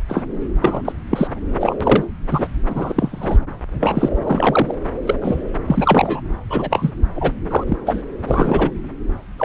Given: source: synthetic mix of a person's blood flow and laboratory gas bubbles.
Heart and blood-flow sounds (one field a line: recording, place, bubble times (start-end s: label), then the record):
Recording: Doppler ultrasound of blood flow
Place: subclavian vein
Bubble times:
0.08-0.24 s: bubbles
0.60-0.82 s: bubbles
0.84-0.92 s: bubbles
1.10-1.28 s: bubbles
1.60-1.77 s: bubbles
1.81-2.05 s: bubbles
2.31-2.48 s: bubbles
2.69-3.38 s: bubbles
3.80-4.09 s: bubbles
4.24-4.74 s: bubbles
5.05-5.15 s: bubbles
5.21-5.40 s: bubbles
5.67-6.21 s: bubbles
6.50-6.92 s: bubbles
7.15-7.32 s: bubbles
7.50-7.63 s: bubbles
7.67-7.77 s: bubbles
7.86-8.03 s: bubbles
8.27-8.71 s: bubbles
9.38-9.45 s: bubbles
From the record:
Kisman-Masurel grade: 243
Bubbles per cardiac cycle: several, 3 to 8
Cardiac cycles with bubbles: 100%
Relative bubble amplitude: loud (0.450 to 0.775)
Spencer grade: 3 (all of the cardiac periods contain showers or single bubble signals, but not dominating or overriding the cardiac motion signals)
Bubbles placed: anywhere in the cardiac cycle